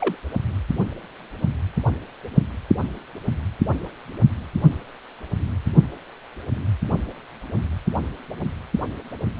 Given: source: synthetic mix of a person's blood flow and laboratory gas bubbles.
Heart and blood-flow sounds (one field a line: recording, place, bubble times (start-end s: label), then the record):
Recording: Doppler ultrasound of blood flow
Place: precordium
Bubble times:
0.00-0.15 s: bubbles
From the record:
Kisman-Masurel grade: 212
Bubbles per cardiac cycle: several, 3 to 8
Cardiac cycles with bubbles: 1 to 10%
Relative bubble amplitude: moderate (0.250 to 0.450)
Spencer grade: 1 (occasional bubble signal discernible with the cardiac motion signal, with majority of cardiac periods free of bubbles)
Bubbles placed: only in the low amplitude regions of the cardiac cycle